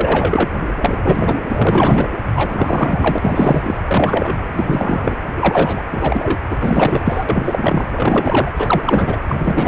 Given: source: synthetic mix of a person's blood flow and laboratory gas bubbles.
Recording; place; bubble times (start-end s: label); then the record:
Doppler ultrasound of blood flow; precordium
0.00-0.51 s: bubbles
0.81-1.36 s: bubbles
1.47-2.06 s: bubbles
2.35-3.77 s: bubbles
3.84-4.40 s: bubbles
4.55-5.16 s: bubbles
5.40-5.83 s: bubbles
5.92-6.37 s: bubbles
6.50-6.57 s: bubbles
6.59-7.25 s: bubbles
7.29-7.86 s: bubbles
7.97-8.52 s: bubbles
8.57-9.20 s: bubbles
9.28-9.68 s: bubbles
From the record:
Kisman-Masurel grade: 343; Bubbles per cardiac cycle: rolling drumbeat, 9 or more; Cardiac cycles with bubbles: 100%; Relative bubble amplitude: loud (0.450 to 0.775); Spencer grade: 3 (all of the cardiac periods contain showers or single bubble signals, but not dominating or overriding the cardiac motion signals); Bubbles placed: anywhere in the cardiac cycle